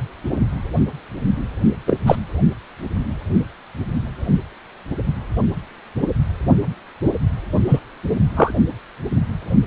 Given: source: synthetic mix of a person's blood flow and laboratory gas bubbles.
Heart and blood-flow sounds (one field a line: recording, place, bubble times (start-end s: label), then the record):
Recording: Doppler ultrasound of blood flow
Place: precordium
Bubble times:
1.86-1.97 s: bubbles
2.06-2.17 s: bubbles
7.67-7.79 s: bubbles
8.36-8.53 s: bubbles
From the record:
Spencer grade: 2 (many but less than half of the cardiac periods contain bubble signals, singularly or in groups)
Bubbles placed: only in the low amplitude regions of the cardiac cycle